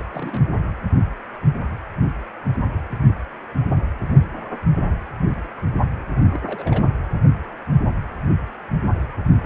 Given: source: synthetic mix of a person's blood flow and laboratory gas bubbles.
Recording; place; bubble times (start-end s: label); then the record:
Doppler ultrasound of blood flow; precordium
0.00-0.03 s: bubbles
0.10-0.42 s: bubbles
6.16-6.21 s: bubbles
6.32-6.39 s: bubbles
6.46-6.82 s: bubbles
From the record:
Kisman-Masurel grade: 221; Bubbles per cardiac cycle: several, 3 to 8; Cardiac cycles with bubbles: 10 to 50%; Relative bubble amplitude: barely perceptible (0.100 to 0.250); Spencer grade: 2 (many but less than half of the cardiac periods contain bubble signals, singularly or in groups); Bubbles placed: anywhere in the cardiac cycle